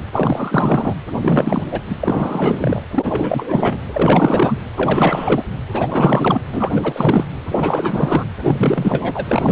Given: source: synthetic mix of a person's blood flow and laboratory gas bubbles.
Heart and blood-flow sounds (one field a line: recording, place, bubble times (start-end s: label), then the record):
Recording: Doppler ultrasound of blood flow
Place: precordium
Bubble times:
0.00-0.03 s: bubbles
0.12-0.94 s: bubbles
1.21-1.62 s: bubbles
1.71-1.80 s: bubbles
1.90-1.96 s: bubbles
1.99-2.81 s: bubbles
2.93-3.78 s: bubbles
3.94-4.59 s: bubbles
4.76-5.44 s: bubbles
5.73-6.41 s: bubbles
6.53-7.29 s: bubbles
7.46-8.25 s: bubbles
8.43-9.52 s: bubbles
From the record:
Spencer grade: 4 (maximum detectable bubble signal sounding continuously throughout systole and diastole of every cardiac period, and overriding the amplitude of the normal cardiac signals)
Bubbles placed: anywhere in the cardiac cycle